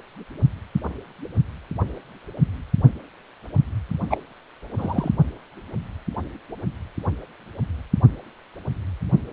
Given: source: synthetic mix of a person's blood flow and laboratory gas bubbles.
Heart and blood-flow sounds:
Doppler ultrasound of blood flow; precordium
4.10-4.17 s: bubbles
4.78-5.09 s: bubbles
From the record:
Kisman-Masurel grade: 113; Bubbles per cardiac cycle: 1 to 2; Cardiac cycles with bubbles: 1 to 10%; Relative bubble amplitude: loud (0.450 to 0.775); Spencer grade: 1 (occasional bubble signal discernible with the cardiac motion signal, with majority of cardiac periods free of bubbles); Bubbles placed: only in the low amplitude regions of the cardiac cycle

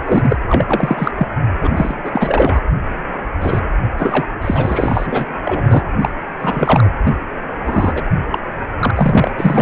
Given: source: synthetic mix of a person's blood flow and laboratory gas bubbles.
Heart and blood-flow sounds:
Doppler ultrasound of blood flow; precordium
0.05-0.36 s: bubbles
0.48-1.11 s: bubbles
1.17-1.27 s: bubbles
1.61-1.93 s: bubbles
2.04-2.60 s: bubbles
3.41-3.59 s: bubbles
3.98-4.25 s: bubbles
4.42-5.26 s: bubbles
5.45-5.83 s: bubbles
6.01-6.10 s: bubbles
6.40-6.91 s: bubbles
7.03-7.15 s: bubbles
7.66-8.04 s: bubbles
8.31-8.38 s: bubbles
8.79-8.91 s: bubbles
8.95-9.31 s: bubbles
9.37-9.62 s: bubbles
From the record:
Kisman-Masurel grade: 343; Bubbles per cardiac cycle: rolling drumbeat, 9 or more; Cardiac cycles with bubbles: 100%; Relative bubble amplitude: loud (0.450 to 0.775); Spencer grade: 3 (all of the cardiac periods contain showers or single bubble signals, but not dominating or overriding the cardiac motion signals); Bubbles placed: anywhere in the cardiac cycle

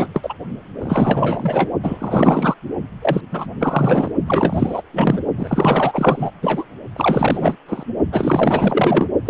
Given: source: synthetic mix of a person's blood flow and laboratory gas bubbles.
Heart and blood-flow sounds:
Doppler ultrasound of blood flow; precordium
0.00-0.34 s: bubbles
0.79-1.70 s: bubbles
1.83-2.54 s: bubbles
3.02-3.21 s: bubbles
3.31-3.46 s: bubbles
3.60-4.12 s: bubbles
4.27-4.82 s: bubbles
4.93-5.21 s: bubbles
5.37-6.31 s: bubbles
6.42-6.65 s: bubbles
6.96-7.57 s: bubbles
7.68-7.83 s: bubbles
8.12-9.06 s: bubbles
9.25-9.30 s: bubbles
From the record:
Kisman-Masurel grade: 444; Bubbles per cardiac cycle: continuous sound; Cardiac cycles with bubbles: 100%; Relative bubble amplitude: maximal (0.775 to 0.999); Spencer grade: 4 (maximum detectable bubble signal sounding continuously throughout systole and diastole of every cardiac period, and overriding the amplitude of the normal cardiac signals); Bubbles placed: only in the low amplitude regions of the cardiac cycle

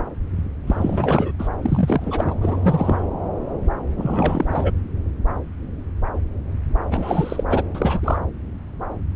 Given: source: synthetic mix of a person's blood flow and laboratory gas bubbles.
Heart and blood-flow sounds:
Doppler ultrasound of blood flow; subclavian vein
0.67-1.31 s: bubbles
1.39-1.48 s: bubbles
1.62-2.35 s: bubbles
2.41-3.07 s: bubbles
3.96-4.72 s: bubbles
6.91-7.43 s: bubbles
7.49-7.63 s: bubbles
7.74-8.19 s: bubbles
From the record:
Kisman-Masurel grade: 333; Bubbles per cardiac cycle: rolling drumbeat, 9 or more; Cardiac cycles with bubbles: 50 to 99%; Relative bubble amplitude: loud (0.450 to 0.775); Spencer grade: 3 (all of the cardiac periods contain showers or single bubble signals, but not dominating or overriding the cardiac motion signals); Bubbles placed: anywhere in the cardiac cycle

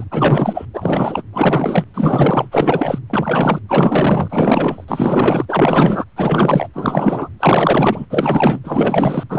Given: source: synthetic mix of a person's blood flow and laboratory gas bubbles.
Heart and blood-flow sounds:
Doppler ultrasound of blood flow; precordium
0.00-0.04 s: bubbles
0.10-0.65 s: bubbles
0.73-1.23 s: bubbles
1.32-1.86 s: bubbles
1.94-2.47 s: bubbles
2.51-2.99 s: bubbles
3.10-3.59 s: bubbles
3.68-4.85 s: bubbles
4.88-5.45 s: bubbles
5.48-6.04 s: bubbles
6.16-6.67 s: bubbles
6.74-7.29 s: bubbles
7.39-8.05 s: bubbles
8.10-8.60 s: bubbles
8.64-9.24 s: bubbles
9.29-9.39 s: bubbles
From the record:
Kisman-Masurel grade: 444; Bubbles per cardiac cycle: continuous sound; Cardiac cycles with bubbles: 100%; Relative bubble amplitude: maximal (0.775 to 0.999); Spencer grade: 4 (maximum detectable bubble signal sounding continuously throughout systole and diastole of every cardiac period, and overriding the amplitude of the normal cardiac signals); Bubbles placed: anywhere in the cardiac cycle

